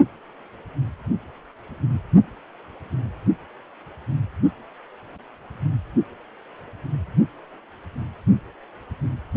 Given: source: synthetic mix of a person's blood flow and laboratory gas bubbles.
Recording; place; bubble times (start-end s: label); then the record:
Doppler ultrasound of blood flow; precordium
no bubbles
From the record:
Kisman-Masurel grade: 000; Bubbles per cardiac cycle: 0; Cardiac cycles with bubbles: 0%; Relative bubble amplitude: no bubbles discernible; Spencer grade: 0 (complete lack of bubble signals)